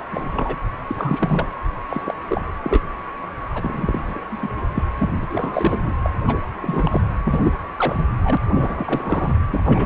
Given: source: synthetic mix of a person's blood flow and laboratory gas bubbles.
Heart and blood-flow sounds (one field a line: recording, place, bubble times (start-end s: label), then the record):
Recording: Doppler ultrasound of blood flow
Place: precordium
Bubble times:
0.12-0.56 s: bubbles
0.87-1.48 s: bubbles
1.90-2.14 s: bubbles
2.28-2.46 s: bubbles
2.64-2.83 s: bubbles
3.54-4.21 s: bubbles
4.29-4.50 s: bubbles
4.74-4.83 s: bubbles
4.98-5.09 s: bubbles
5.20-5.27 s: bubbles
5.31-5.92 s: bubbles
6.03-6.10 s: bubbles
6.25-6.38 s: bubbles
6.61-7.01 s: bubbles
7.24-7.53 s: bubbles
7.77-8.07 s: bubbles
8.23-8.38 s: bubbles
8.53-9.33 s: bubbles
9.50-9.86 s: bubbles
From the record:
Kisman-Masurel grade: 342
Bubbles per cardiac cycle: rolling drumbeat, 9 or more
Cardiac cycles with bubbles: 100%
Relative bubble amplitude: moderate (0.250 to 0.450)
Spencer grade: 3 (all of the cardiac periods contain showers or single bubble signals, but not dominating or overriding the cardiac motion signals)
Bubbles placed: anywhere in the cardiac cycle